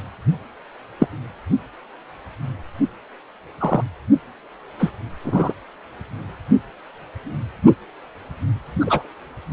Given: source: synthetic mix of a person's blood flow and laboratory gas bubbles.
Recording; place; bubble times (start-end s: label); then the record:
Doppler ultrasound of blood flow; precordium
0.99-1.06 s: bubbles
3.60-3.82 s: bubbles
4.79-4.91 s: bubbles
5.24-5.53 s: bubbles
8.80-9.07 s: bubbles
From the record:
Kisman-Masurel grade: 123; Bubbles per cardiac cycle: 1 to 2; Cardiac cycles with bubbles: 10 to 50%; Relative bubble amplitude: loud (0.450 to 0.775); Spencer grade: 2 (many but less than half of the cardiac periods contain bubble signals, singularly or in groups); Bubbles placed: only in the low amplitude regions of the cardiac cycle